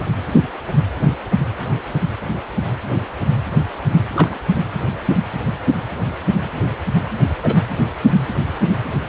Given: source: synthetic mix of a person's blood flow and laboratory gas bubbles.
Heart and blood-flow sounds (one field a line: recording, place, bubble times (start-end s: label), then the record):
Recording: Doppler ultrasound of blood flow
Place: precordium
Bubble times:
0.00-0.03 s: bubbles
4.14-4.38 s: bubbles
7.43-7.55 s: bubbles
From the record:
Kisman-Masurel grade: 123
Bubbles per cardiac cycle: 1 to 2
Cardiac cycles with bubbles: 10 to 50%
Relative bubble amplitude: loud (0.450 to 0.775)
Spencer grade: 2 (many but less than half of the cardiac periods contain bubble signals, singularly or in groups)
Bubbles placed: anywhere in the cardiac cycle